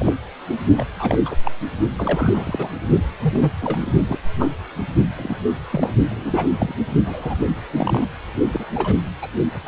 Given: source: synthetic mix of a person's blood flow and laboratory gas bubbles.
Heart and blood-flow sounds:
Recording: Doppler ultrasound of blood flow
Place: precordium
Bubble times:
0.00-0.14 s: bubbles
0.48-0.57 s: bubbles
0.77-0.84 s: bubbles
0.96-1.19 s: bubbles
1.25-1.35 s: bubbles
1.44-1.52 s: bubbles
1.97-2.68 s: bubbles
3.22-3.51 s: bubbles
3.60-3.87 s: bubbles
4.08-4.19 s: bubbles
4.39-4.49 s: bubbles
5.16-5.40 s: bubbles
5.45-5.51 s: bubbles
5.71-5.94 s: bubbles
6.10-6.47 s: bubbles
6.58-6.75 s: bubbles
7.04-7.37 s: bubbles
7.75-8.09 s: bubbles
8.52-8.65 s: bubbles
8.74-8.96 s: bubbles
9.22-9.29 s: bubbles
9.64-9.68 s: bubbles
From the record:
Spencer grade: 3 (all of the cardiac periods contain showers or single bubble signals, but not dominating or overriding the cardiac motion signals)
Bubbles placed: only in the low amplitude regions of the cardiac cycle

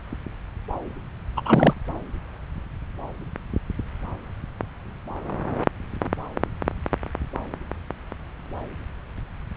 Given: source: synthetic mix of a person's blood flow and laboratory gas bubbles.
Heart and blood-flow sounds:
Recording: Doppler ultrasound of blood flow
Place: subclavian vein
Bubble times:
1.37-1.42 s: bubbles
1.45-1.73 s: bubbles
From the record:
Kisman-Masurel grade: 213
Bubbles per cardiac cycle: several, 3 to 8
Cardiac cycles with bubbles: 1 to 10%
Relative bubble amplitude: loud (0.450 to 0.775)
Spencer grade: 1 (occasional bubble signal discernible with the cardiac motion signal, with majority of cardiac periods free of bubbles)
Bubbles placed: anywhere in the cardiac cycle

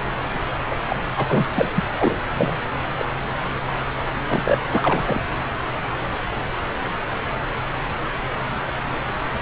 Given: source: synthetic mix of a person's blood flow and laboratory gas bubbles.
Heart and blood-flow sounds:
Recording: Doppler ultrasound of blood flow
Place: subclavian vein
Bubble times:
0.71-0.76 s: bubbles
0.88-0.95 s: bubbles
1.17-1.26 s: bubbles
1.29-1.47 s: bubbles
1.55-1.69 s: bubbles
1.76-1.84 s: bubbles
1.98-2.19 s: bubbles
2.33-2.58 s: bubbles
2.99-3.04 s: bubbles
4.29-4.58 s: bubbles
4.70-5.22 s: bubbles
From the record:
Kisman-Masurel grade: 222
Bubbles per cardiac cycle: several, 3 to 8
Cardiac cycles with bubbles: 10 to 50%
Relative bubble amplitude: moderate (0.250 to 0.450)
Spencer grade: 2 (many but less than half of the cardiac periods contain bubble signals, singularly or in groups)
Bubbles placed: anywhere in the cardiac cycle

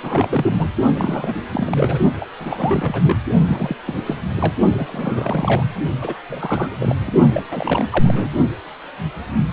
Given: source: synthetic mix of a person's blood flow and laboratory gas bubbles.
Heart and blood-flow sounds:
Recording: Doppler ultrasound of blood flow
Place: precordium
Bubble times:
0.03-0.70 s: bubbles
0.95-1.41 s: bubbles
1.52-1.99 s: bubbles
2.20-2.28 s: bubbles
2.40-3.17 s: bubbles
3.47-3.76 s: bubbles
3.86-4.03 s: bubbles
4.06-4.16 s: bubbles
4.36-4.54 s: bubbles
4.73-5.64 s: bubbles
6.01-6.15 s: bubbles
6.29-6.77 s: bubbles
6.80-6.96 s: bubbles
7.00-7.12 s: bubbles
7.33-7.43 s: bubbles
7.51-8.30 s: bubbles
From the record:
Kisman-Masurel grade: 332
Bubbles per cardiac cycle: rolling drumbeat, 9 or more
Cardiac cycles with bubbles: 50 to 99%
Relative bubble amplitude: moderate (0.250 to 0.450)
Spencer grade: 3 (all of the cardiac periods contain showers or single bubble signals, but not dominating or overriding the cardiac motion signals)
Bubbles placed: only in the low amplitude regions of the cardiac cycle

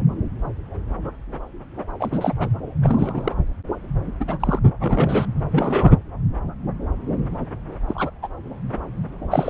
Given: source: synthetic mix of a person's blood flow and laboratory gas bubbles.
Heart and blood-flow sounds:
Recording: Doppler ultrasound of blood flow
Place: subclavian vein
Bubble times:
1.99-2.33 s: bubbles
2.39-2.49 s: bubbles
2.83-3.35 s: bubbles
4.19-4.25 s: bubbles
4.27-4.59 s: bubbles
4.80-5.27 s: bubbles
5.51-5.92 s: bubbles
7.88-8.11 s: bubbles
8.22-8.28 s: bubbles
9.30-9.49 s: bubbles
From the record:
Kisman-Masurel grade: 232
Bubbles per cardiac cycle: several, 3 to 8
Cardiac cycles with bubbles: 50 to 99%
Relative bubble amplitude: moderate (0.250 to 0.450)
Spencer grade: 3 (all of the cardiac periods contain showers or single bubble signals, but not dominating or overriding the cardiac motion signals)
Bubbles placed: anywhere in the cardiac cycle

